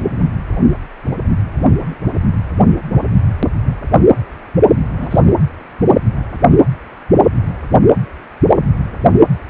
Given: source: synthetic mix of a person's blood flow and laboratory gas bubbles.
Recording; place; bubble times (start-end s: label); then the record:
Doppler ultrasound of blood flow; precordium
4.97-5.20 s: bubbles
From the record:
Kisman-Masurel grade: 113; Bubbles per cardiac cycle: 1 to 2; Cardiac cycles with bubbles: 1 to 10%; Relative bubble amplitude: loud (0.450 to 0.775); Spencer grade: 1 (occasional bubble signal discernible with the cardiac motion signal, with majority of cardiac periods free of bubbles); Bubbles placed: anywhere in the cardiac cycle